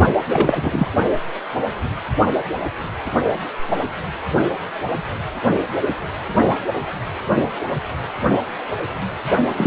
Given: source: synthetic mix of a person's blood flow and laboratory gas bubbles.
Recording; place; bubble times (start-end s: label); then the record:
Doppler ultrasound of blood flow; precordium
0.33-0.87 s: bubbles
9.57-9.67 s: bubbles
From the record:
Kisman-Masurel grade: 223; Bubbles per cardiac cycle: several, 3 to 8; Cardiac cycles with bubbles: 10 to 50%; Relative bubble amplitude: loud (0.450 to 0.775); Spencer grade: 2 (many but less than half of the cardiac periods contain bubble signals, singularly or in groups); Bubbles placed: only in the low amplitude regions of the cardiac cycle